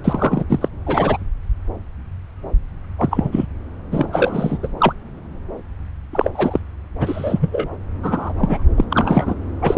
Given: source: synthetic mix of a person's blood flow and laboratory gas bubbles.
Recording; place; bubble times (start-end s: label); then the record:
Doppler ultrasound of blood flow; subclavian vein
0.04-0.44 s: bubbles
0.49-0.69 s: bubbles
0.86-1.17 s: bubbles
2.98-3.46 s: bubbles
3.92-4.58 s: bubbles
4.62-4.67 s: bubbles
4.79-4.93 s: bubbles
6.12-6.29 s: bubbles
6.34-6.59 s: bubbles
7.00-7.68 s: bubbles
8.02-8.33 s: bubbles
8.38-8.62 s: bubbles
8.76-8.84 s: bubbles
8.90-9.34 s: bubbles
9.59-9.78 s: bubbles
From the record:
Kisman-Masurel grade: 233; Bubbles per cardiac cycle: several, 3 to 8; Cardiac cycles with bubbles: 50 to 99%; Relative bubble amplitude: loud (0.450 to 0.775); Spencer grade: 3 (all of the cardiac periods contain showers or single bubble signals, but not dominating or overriding the cardiac motion signals); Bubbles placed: anywhere in the cardiac cycle